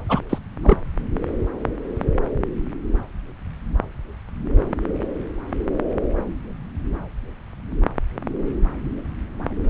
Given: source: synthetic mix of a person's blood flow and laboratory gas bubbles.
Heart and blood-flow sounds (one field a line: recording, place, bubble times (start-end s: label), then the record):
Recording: Doppler ultrasound of blood flow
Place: subclavian vein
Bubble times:
0.08-0.20 s: bubbles
0.30-0.39 s: bubbles
0.64-0.78 s: bubbles
From the record:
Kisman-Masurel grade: 212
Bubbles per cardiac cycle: several, 3 to 8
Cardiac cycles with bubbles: 1 to 10%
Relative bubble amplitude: moderate (0.250 to 0.450)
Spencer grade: 1 (occasional bubble signal discernible with the cardiac motion signal, with majority of cardiac periods free of bubbles)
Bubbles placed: anywhere in the cardiac cycle